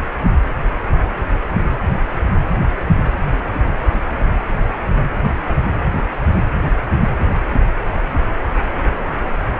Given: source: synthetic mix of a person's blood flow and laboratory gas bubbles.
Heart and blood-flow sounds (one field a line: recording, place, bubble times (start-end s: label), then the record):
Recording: Doppler ultrasound of blood flow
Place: precordium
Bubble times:
3.93-3.99 s: bubbles
From the record:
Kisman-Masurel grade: 111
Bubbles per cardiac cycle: 1 to 2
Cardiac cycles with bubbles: 1 to 10%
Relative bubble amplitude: barely perceptible (0.100 to 0.250)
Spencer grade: 1 (occasional bubble signal discernible with the cardiac motion signal, with majority of cardiac periods free of bubbles)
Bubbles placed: anywhere in the cardiac cycle